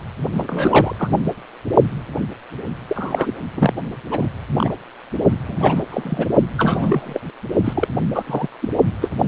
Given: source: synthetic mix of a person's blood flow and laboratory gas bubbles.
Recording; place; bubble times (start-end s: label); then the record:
Doppler ultrasound of blood flow; precordium
0.34-0.96 s: bubbles
0.99-1.09 s: bubbles
1.11-1.18 s: bubbles
2.88-3.32 s: bubbles
3.56-3.73 s: bubbles
4.11-4.27 s: bubbles
4.57-4.72 s: bubbles
5.47-5.81 s: bubbles
5.90-6.26 s: bubbles
6.57-7.21 s: bubbles
7.64-7.87 s: bubbles
8.15-8.24 s: bubbles
8.27-8.47 s: bubbles
8.62-8.69 s: bubbles
9.02-9.10 s: bubbles
From the record:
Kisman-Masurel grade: 242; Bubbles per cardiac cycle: several, 3 to 8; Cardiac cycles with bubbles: 100%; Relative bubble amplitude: moderate (0.250 to 0.450); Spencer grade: 3 (all of the cardiac periods contain showers or single bubble signals, but not dominating or overriding the cardiac motion signals); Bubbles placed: only in the low amplitude regions of the cardiac cycle